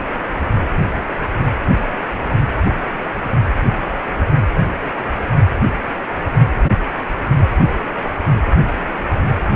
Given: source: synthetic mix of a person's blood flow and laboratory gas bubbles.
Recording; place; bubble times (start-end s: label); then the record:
Doppler ultrasound of blood flow; precordium
no bubbles
From the record:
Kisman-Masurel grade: 000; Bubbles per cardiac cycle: 0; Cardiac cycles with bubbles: 0%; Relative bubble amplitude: no bubbles discernible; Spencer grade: 0 (complete lack of bubble signals)